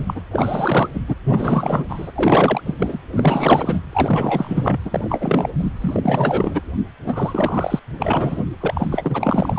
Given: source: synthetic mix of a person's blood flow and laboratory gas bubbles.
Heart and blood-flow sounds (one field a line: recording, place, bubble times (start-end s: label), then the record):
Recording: Doppler ultrasound of blood flow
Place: precordium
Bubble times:
0.00-0.21 s: bubbles
0.31-0.88 s: bubbles
0.93-1.01 s: bubbles
1.08-1.15 s: bubbles
1.24-1.86 s: bubbles
1.89-2.11 s: bubbles
2.15-2.62 s: bubbles
2.65-2.74 s: bubbles
2.79-2.98 s: bubbles
3.12-3.80 s: bubbles
3.92-4.79 s: bubbles
4.85-5.50 s: bubbles
5.58-5.71 s: bubbles
5.80-6.61 s: bubbles
7.04-7.79 s: bubbles
7.98-8.44 s: bubbles
8.60-9.59 s: bubbles
From the record:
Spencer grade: 4 (maximum detectable bubble signal sounding continuously throughout systole and diastole of every cardiac period, and overriding the amplitude of the normal cardiac signals)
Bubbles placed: anywhere in the cardiac cycle